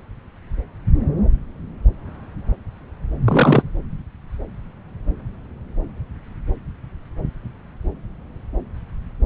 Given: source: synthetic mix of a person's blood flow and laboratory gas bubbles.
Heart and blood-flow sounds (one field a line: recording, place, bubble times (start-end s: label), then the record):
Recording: Doppler ultrasound of blood flow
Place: subclavian vein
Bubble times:
3.25-3.62 s: bubbles
From the record:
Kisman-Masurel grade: 213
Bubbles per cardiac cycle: several, 3 to 8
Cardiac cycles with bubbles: 1 to 10%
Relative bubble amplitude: loud (0.450 to 0.775)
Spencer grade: 1 (occasional bubble signal discernible with the cardiac motion signal, with majority of cardiac periods free of bubbles)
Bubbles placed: anywhere in the cardiac cycle